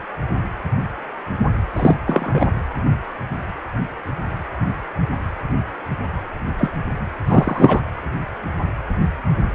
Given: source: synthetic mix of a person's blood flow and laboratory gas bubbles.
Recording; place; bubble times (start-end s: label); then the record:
Doppler ultrasound of blood flow; precordium
1.76-1.98 s: bubbles
2.06-2.48 s: bubbles
6.58-6.70 s: bubbles
7.27-7.80 s: bubbles
From the record:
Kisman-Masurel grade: 223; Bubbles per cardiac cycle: several, 3 to 8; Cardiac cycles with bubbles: 10 to 50%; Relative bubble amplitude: loud (0.450 to 0.775); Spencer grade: 2 (many but less than half of the cardiac periods contain bubble signals, singularly or in groups); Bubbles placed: anywhere in the cardiac cycle